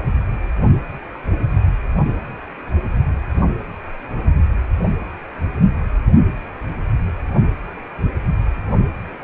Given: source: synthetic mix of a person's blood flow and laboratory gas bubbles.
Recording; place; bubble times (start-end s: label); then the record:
Doppler ultrasound of blood flow; precordium
no bubbles
From the record:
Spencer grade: 0 (complete lack of bubble signals)